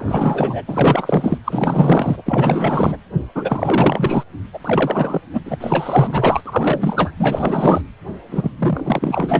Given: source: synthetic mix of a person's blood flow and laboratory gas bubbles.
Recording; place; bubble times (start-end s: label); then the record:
Doppler ultrasound of blood flow; precordium
0.00-0.63 s: bubbles
0.66-1.38 s: bubbles
1.44-2.96 s: bubbles
3.34-4.24 s: bubbles
4.53-4.59 s: bubbles
4.64-5.21 s: bubbles
5.33-5.41 s: bubbles
5.45-5.56 s: bubbles
5.60-6.41 s: bubbles
6.46-7.11 s: bubbles
7.19-7.81 s: bubbles
8.30-8.51 s: bubbles
8.58-9.40 s: bubbles
From the record:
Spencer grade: 4 (maximum detectable bubble signal sounding continuously throughout systole and diastole of every cardiac period, and overriding the amplitude of the normal cardiac signals); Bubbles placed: anywhere in the cardiac cycle